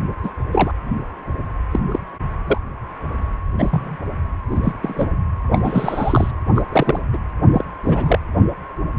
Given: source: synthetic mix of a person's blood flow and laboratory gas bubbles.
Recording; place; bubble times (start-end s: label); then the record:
Doppler ultrasound of blood flow; precordium
0.23-0.29 s: bubbles
0.52-0.72 s: bubbles
1.71-1.80 s: bubbles
1.91-1.99 s: bubbles
2.46-2.57 s: bubbles
3.58-3.96 s: bubbles
4.50-4.61 s: bubbles
4.64-4.73 s: bubbles
4.82-5.10 s: bubbles
5.50-6.31 s: bubbles
6.56-6.62 s: bubbles
6.72-7.00 s: bubbles
7.12-7.18 s: bubbles
7.51-7.64 s: bubbles
7.84-8.19 s: bubbles
From the record:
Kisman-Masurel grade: 232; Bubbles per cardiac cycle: several, 3 to 8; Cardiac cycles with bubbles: 50 to 99%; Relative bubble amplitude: moderate (0.250 to 0.450); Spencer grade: 3 (all of the cardiac periods contain showers or single bubble signals, but not dominating or overriding the cardiac motion signals); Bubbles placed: anywhere in the cardiac cycle